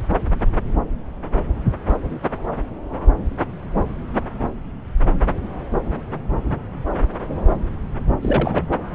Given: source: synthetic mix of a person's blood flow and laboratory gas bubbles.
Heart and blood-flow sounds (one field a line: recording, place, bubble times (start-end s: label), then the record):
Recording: Doppler ultrasound of blood flow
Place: subclavian vein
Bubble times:
8.21-8.65 s: bubbles
From the record:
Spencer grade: 1 (occasional bubble signal discernible with the cardiac motion signal, with majority of cardiac periods free of bubbles)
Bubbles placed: anywhere in the cardiac cycle